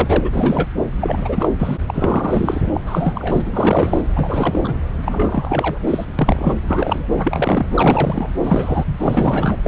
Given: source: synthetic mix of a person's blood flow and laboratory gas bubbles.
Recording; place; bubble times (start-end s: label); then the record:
Doppler ultrasound of blood flow; subclavian vein
0.00-0.30 s: bubbles
0.33-0.70 s: bubbles
1.00-1.49 s: bubbles
1.58-1.78 s: bubbles
1.88-2.61 s: bubbles
2.74-2.81 s: bubbles
2.86-3.42 s: bubbles
3.46-4.02 s: bubbles
4.16-4.60 s: bubbles
4.64-4.79 s: bubbles
5.06-5.79 s: bubbles
5.82-6.05 s: bubbles
6.19-6.55 s: bubbles
6.64-7.08 s: bubbles
7.17-7.66 s: bubbles
7.75-8.29 s: bubbles
8.44-8.85 s: bubbles
9.00-9.68 s: bubbles
From the record:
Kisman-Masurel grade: 342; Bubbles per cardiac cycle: rolling drumbeat, 9 or more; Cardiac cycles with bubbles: 100%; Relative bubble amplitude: moderate (0.250 to 0.450); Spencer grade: 3 (all of the cardiac periods contain showers or single bubble signals, but not dominating or overriding the cardiac motion signals); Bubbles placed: anywhere in the cardiac cycle